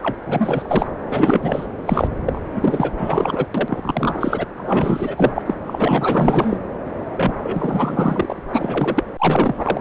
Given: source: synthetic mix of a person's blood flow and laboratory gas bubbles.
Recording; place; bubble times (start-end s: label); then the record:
Doppler ultrasound of blood flow; subclavian vein
0.00-0.15 s: bubbles
0.27-0.88 s: bubbles
1.09-1.66 s: bubbles
1.85-2.08 s: bubbles
2.26-2.41 s: bubbles
2.55-2.92 s: bubbles
2.97-3.47 s: bubbles
3.54-4.45 s: bubbles
4.57-5.32 s: bubbles
5.34-5.42 s: bubbles
5.46-5.55 s: bubbles
5.69-6.57 s: bubbles
7.17-7.32 s: bubbles
7.39-8.43 s: bubbles
8.48-9.04 s: bubbles
9.18-9.81 s: bubbles
From the record:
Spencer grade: 4 (maximum detectable bubble signal sounding continuously throughout systole and diastole of every cardiac period, and overriding the amplitude of the normal cardiac signals); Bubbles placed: anywhere in the cardiac cycle